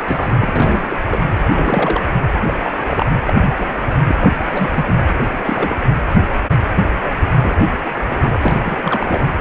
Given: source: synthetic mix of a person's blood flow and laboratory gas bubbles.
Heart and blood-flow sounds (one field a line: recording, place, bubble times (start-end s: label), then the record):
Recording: Doppler ultrasound of blood flow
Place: precordium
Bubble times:
0.00-0.03 s: bubbles
0.07-0.97 s: bubbles
1.10-1.20 s: bubbles
1.50-2.01 s: bubbles
2.46-2.60 s: bubbles
2.63-3.06 s: bubbles
3.25-3.33 s: bubbles
3.40-3.56 s: bubbles
3.58-3.94 s: bubbles
4.07-4.71 s: bubbles
4.74-4.97 s: bubbles
5.15-5.29 s: bubbles
5.44-5.76 s: bubbles
7.39-7.68 s: bubbles
8.04-8.37 s: bubbles
8.43-9.24 s: bubbles
From the record:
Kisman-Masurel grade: 232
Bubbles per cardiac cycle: several, 3 to 8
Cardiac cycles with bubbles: 50 to 99%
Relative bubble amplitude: moderate (0.250 to 0.450)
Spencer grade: 3 (all of the cardiac periods contain showers or single bubble signals, but not dominating or overriding the cardiac motion signals)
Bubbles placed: anywhere in the cardiac cycle